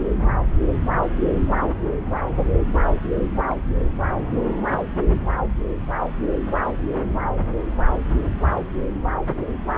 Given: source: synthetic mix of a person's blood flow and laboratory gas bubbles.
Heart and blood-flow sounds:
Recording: Doppler ultrasound of blood flow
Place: subclavian vein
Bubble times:
3.48-3.56 s: bubbles
From the record:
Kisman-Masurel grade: 111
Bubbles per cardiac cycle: 1 to 2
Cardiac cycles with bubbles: 1 to 10%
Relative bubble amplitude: barely perceptible (0.100 to 0.250)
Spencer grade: 1 (occasional bubble signal discernible with the cardiac motion signal, with majority of cardiac periods free of bubbles)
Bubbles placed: anywhere in the cardiac cycle

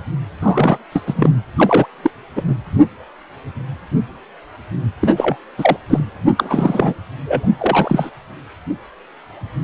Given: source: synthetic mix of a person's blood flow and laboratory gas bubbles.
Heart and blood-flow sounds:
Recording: Doppler ultrasound of blood flow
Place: precordium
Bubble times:
0.39-0.77 s: bubbles
0.92-1.00 s: bubbles
1.06-1.30 s: bubbles
1.56-1.86 s: bubbles
2.02-2.11 s: bubbles
2.36-2.42 s: bubbles
2.47-2.54 s: bubbles
5.00-5.37 s: bubbles
5.58-5.77 s: bubbles
5.90-6.04 s: bubbles
6.37-6.94 s: bubbles
7.24-7.48 s: bubbles
7.58-8.11 s: bubbles
From the record:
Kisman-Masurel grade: 233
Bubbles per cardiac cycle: several, 3 to 8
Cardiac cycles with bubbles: 50 to 99%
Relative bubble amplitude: loud (0.450 to 0.775)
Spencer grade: 3 (all of the cardiac periods contain showers or single bubble signals, but not dominating or overriding the cardiac motion signals)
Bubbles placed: anywhere in the cardiac cycle

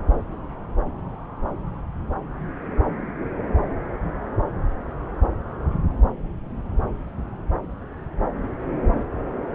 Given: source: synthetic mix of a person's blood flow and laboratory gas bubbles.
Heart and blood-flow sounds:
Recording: Doppler ultrasound of blood flow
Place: subclavian vein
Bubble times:
no bubbles
From the record:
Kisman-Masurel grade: 000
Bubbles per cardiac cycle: 0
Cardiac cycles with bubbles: 0%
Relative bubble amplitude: no bubbles discernible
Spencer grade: 0 (complete lack of bubble signals)

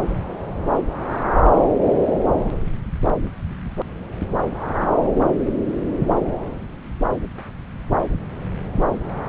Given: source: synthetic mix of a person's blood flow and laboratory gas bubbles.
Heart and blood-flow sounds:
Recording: Doppler ultrasound of blood flow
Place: subclavian vein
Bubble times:
no bubbles
From the record:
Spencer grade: 0 (complete lack of bubble signals)

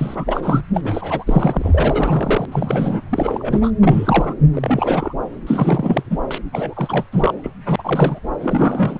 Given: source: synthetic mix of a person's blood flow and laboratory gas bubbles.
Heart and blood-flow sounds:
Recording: Doppler ultrasound of blood flow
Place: subclavian vein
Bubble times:
0.00-0.61 s: bubbles
0.73-0.81 s: bubbles
0.84-2.46 s: bubbles
2.52-3.02 s: bubbles
3.10-3.71 s: bubbles
3.82-4.34 s: bubbles
4.54-5.13 s: bubbles
5.46-6.18 s: bubbles
6.30-6.38 s: bubbles
6.52-7.04 s: bubbles
7.12-7.34 s: bubbles
7.43-7.51 s: bubbles
7.65-7.76 s: bubbles
7.79-8.20 s: bubbles
8.40-8.99 s: bubbles
From the record:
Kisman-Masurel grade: 342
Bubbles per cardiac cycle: rolling drumbeat, 9 or more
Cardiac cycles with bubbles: 100%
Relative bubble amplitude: moderate (0.250 to 0.450)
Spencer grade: 3 (all of the cardiac periods contain showers or single bubble signals, but not dominating or overriding the cardiac motion signals)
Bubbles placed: anywhere in the cardiac cycle

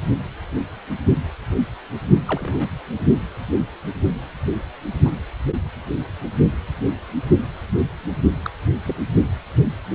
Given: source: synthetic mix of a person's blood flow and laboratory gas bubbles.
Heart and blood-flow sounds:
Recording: Doppler ultrasound of blood flow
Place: precordium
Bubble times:
2.26-2.69 s: bubbles
5.05-5.10 s: bubbles
8.45-8.50 s: bubbles
8.86-8.96 s: bubbles
From the record:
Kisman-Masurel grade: 122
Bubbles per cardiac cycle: 1 to 2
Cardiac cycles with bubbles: 10 to 50%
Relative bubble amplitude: moderate (0.250 to 0.450)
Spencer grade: 2 (many but less than half of the cardiac periods contain bubble signals, singularly or in groups)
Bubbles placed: only in the low amplitude regions of the cardiac cycle

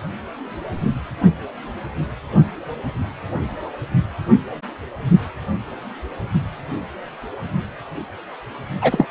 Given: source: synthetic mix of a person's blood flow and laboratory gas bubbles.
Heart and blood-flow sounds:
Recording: Doppler ultrasound of blood flow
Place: precordium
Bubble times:
8.81-9.06 s: bubbles
From the record:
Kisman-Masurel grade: 213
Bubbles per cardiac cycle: several, 3 to 8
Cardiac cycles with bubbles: 1 to 10%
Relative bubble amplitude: loud (0.450 to 0.775)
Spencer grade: 1 (occasional bubble signal discernible with the cardiac motion signal, with majority of cardiac periods free of bubbles)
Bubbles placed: only in the low amplitude regions of the cardiac cycle

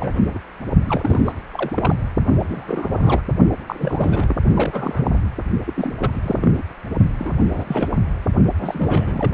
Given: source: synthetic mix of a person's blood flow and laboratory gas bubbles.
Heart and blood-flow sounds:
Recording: Doppler ultrasound of blood flow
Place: precordium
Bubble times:
0.00-0.39 s: bubbles
0.87-1.21 s: bubbles
1.25-1.33 s: bubbles
1.51-1.73 s: bubbles
1.77-1.96 s: bubbles
2.40-3.21 s: bubbles
3.68-4.36 s: bubbles
4.56-5.11 s: bubbles
5.13-5.18 s: bubbles
5.66-5.92 s: bubbles
6.00-6.51 s: bubbles
6.55-6.62 s: bubbles
7.19-7.99 s: bubbles
8.54-9.32 s: bubbles
From the record:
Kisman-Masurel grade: 342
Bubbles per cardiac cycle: rolling drumbeat, 9 or more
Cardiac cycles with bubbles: 100%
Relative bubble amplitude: moderate (0.250 to 0.450)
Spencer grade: 3 (all of the cardiac periods contain showers or single bubble signals, but not dominating or overriding the cardiac motion signals)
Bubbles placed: only in the low amplitude regions of the cardiac cycle

